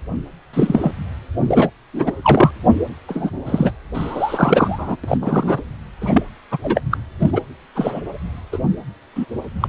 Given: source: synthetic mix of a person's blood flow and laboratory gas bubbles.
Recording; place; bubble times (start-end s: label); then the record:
Doppler ultrasound of blood flow; precordium
0.53-0.92 s: bubbles
1.38-1.70 s: bubbles
1.94-2.12 s: bubbles
2.22-2.51 s: bubbles
3.08-3.31 s: bubbles
3.46-3.71 s: bubbles
3.93-4.96 s: bubbles
5.04-5.17 s: bubbles
5.21-5.61 s: bubbles
6.01-6.22 s: bubbles
6.51-6.58 s: bubbles
6.63-6.82 s: bubbles
6.91-6.97 s: bubbles
7.20-7.41 s: bubbles
7.75-8.01 s: bubbles
8.52-8.58 s: bubbles
9.15-9.26 s: bubbles
9.60-9.68 s: bubbles
From the record:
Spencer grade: 3 (all of the cardiac periods contain showers or single bubble signals, but not dominating or overriding the cardiac motion signals); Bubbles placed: anywhere in the cardiac cycle